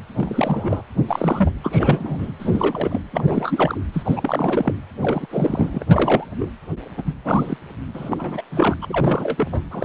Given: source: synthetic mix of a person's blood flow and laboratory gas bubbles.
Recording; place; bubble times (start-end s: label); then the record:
Doppler ultrasound of blood flow; precordium
0.17-0.83 s: bubbles
1.08-1.50 s: bubbles
1.64-2.32 s: bubbles
2.39-3.02 s: bubbles
3.12-3.81 s: bubbles
3.93-4.73 s: bubbles
5.01-5.26 s: bubbles
5.30-5.84 s: bubbles
5.89-6.26 s: bubbles
6.39-6.51 s: bubbles
6.97-7.02 s: bubbles
7.05-7.13 s: bubbles
7.25-7.57 s: bubbles
7.94-8.42 s: bubbles
8.51-8.78 s: bubbles
8.82-9.48 s: bubbles
9.52-9.62 s: bubbles
9.71-9.84 s: bubbles
From the record:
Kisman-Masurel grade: 332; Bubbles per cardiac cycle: rolling drumbeat, 9 or more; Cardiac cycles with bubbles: 50 to 99%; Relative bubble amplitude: moderate (0.250 to 0.450); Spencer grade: 3 (all of the cardiac periods contain showers or single bubble signals, but not dominating or overriding the cardiac motion signals); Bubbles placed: anywhere in the cardiac cycle